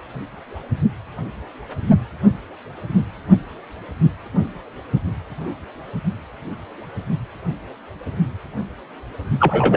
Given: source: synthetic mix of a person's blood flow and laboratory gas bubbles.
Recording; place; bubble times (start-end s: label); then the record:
Doppler ultrasound of blood flow; precordium
9.39-9.77 s: bubbles
From the record:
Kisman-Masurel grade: 113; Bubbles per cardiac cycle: 1 to 2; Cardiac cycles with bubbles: 1 to 10%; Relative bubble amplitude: loud (0.450 to 0.775); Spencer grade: 1 (occasional bubble signal discernible with the cardiac motion signal, with majority of cardiac periods free of bubbles); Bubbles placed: only in the low amplitude regions of the cardiac cycle